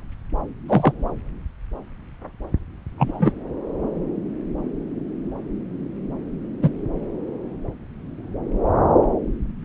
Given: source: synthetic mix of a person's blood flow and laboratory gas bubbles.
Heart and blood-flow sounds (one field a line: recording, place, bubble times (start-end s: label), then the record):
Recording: Doppler ultrasound of blood flow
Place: subclavian vein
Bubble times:
0.69-0.92 s: bubbles
2.98-3.32 s: bubbles
6.62-6.69 s: bubbles
From the record:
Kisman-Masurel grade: 123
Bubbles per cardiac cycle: 1 to 2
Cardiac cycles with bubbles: 10 to 50%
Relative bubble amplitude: loud (0.450 to 0.775)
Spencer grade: 2 (many but less than half of the cardiac periods contain bubble signals, singularly or in groups)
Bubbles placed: anywhere in the cardiac cycle